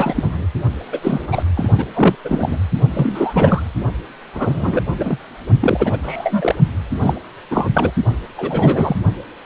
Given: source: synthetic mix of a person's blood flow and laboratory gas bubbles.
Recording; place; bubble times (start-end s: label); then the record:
Doppler ultrasound of blood flow; precordium
0.00-0.46 s: bubbles
0.92-1.00 s: bubbles
1.02-1.27 s: bubbles
1.31-1.43 s: bubbles
1.54-1.70 s: bubbles
1.77-1.85 s: bubbles
1.95-2.16 s: bubbles
2.24-2.58 s: bubbles
2.93-3.64 s: bubbles
4.34-4.83 s: bubbles
4.98-5.18 s: bubbles
5.60-5.98 s: bubbles
6.02-6.55 s: bubbles
7.00-7.13 s: bubbles
7.50-7.69 s: bubbles
7.73-7.91 s: bubbles
8.37-8.96 s: bubbles
From the record:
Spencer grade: 3 (all of the cardiac periods contain showers or single bubble signals, but not dominating or overriding the cardiac motion signals); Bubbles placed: only in the low amplitude regions of the cardiac cycle